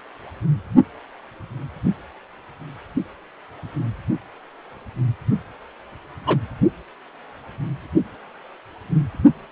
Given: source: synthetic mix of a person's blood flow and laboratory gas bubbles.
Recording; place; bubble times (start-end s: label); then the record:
Doppler ultrasound of blood flow; precordium
6.26-6.38 s: bubbles
From the record:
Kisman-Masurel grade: 123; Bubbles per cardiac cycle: 1 to 2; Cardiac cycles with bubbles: 10 to 50%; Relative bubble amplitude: loud (0.450 to 0.775); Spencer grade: 2 (many but less than half of the cardiac periods contain bubble signals, singularly or in groups); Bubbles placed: only in the low amplitude regions of the cardiac cycle